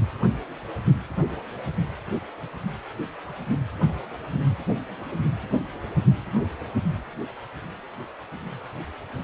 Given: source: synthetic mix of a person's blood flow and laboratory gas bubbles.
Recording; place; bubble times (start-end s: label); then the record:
Doppler ultrasound of blood flow; precordium
no bubbles
From the record:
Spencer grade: 0 (complete lack of bubble signals)